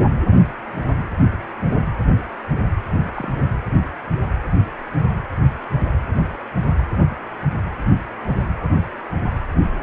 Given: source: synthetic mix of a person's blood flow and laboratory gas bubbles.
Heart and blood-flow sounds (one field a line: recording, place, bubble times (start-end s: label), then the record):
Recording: Doppler ultrasound of blood flow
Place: precordium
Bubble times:
3.04-3.32 s: bubbles
From the record:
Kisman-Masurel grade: 211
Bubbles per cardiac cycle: several, 3 to 8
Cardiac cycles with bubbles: 1 to 10%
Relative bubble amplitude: barely perceptible (0.100 to 0.250)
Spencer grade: 1 (occasional bubble signal discernible with the cardiac motion signal, with majority of cardiac periods free of bubbles)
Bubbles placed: anywhere in the cardiac cycle